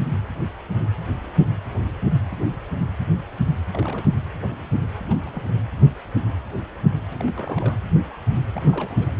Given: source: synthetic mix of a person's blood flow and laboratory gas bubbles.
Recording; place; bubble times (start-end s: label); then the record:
Doppler ultrasound of blood flow; precordium
3.72-4.08 s: bubbles
5.09-5.16 s: bubbles
5.26-5.54 s: bubbles
7.09-7.79 s: bubbles
8.56-9.11 s: bubbles
From the record:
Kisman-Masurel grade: 221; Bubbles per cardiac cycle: several, 3 to 8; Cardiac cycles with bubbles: 10 to 50%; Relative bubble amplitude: barely perceptible (0.100 to 0.250); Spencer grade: 2 (many but less than half of the cardiac periods contain bubble signals, singularly or in groups); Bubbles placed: anywhere in the cardiac cycle